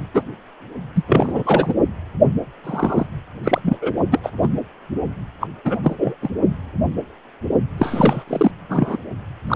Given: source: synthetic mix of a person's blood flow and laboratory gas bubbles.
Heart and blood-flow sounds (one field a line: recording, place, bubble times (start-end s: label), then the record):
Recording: Doppler ultrasound of blood flow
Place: precordium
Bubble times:
0.14-0.22 s: bubbles
0.95-1.02 s: bubbles
1.07-1.74 s: bubbles
2.64-3.06 s: bubbles
3.44-3.78 s: bubbles
3.81-3.92 s: bubbles
4.12-4.20 s: bubbles
4.23-4.30 s: bubbles
4.42-4.49 s: bubbles
5.40-5.47 s: bubbles
5.64-5.78 s: bubbles
5.83-5.95 s: bubbles
5.98-6.14 s: bubbles
6.22-6.29 s: bubbles
7.78-8.24 s: bubbles
8.28-8.51 s: bubbles
8.69-8.97 s: bubbles
9.45-9.56 s: bubbles
From the record:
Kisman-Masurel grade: 233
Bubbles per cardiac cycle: several, 3 to 8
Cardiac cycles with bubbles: 50 to 99%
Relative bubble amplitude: loud (0.450 to 0.775)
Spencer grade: 3 (all of the cardiac periods contain showers or single bubble signals, but not dominating or overriding the cardiac motion signals)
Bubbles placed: only in the low amplitude regions of the cardiac cycle